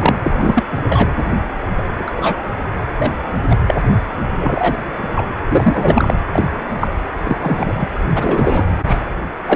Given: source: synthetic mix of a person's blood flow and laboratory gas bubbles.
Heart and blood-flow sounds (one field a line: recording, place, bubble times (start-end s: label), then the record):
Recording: Doppler ultrasound of blood flow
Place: precordium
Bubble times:
0.00-0.16 s: bubbles
0.23-0.63 s: bubbles
0.71-0.84 s: bubbles
0.86-1.11 s: bubbles
1.77-1.83 s: bubbles
1.97-2.49 s: bubbles
2.98-3.12 s: bubbles
3.50-3.56 s: bubbles
3.67-3.77 s: bubbles
4.39-4.78 s: bubbles
5.14-5.21 s: bubbles
5.48-6.14 s: bubbles
6.32-6.71 s: bubbles
6.80-6.88 s: bubbles
7.24-7.37 s: bubbles
7.43-7.89 s: bubbles
8.14-8.66 s: bubbles
8.87-8.99 s: bubbles
9.46-9.56 s: bubbles
From the record:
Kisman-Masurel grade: 243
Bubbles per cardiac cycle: several, 3 to 8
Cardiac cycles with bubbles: 100%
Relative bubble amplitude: loud (0.450 to 0.775)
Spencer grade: 3 (all of the cardiac periods contain showers or single bubble signals, but not dominating or overriding the cardiac motion signals)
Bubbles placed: anywhere in the cardiac cycle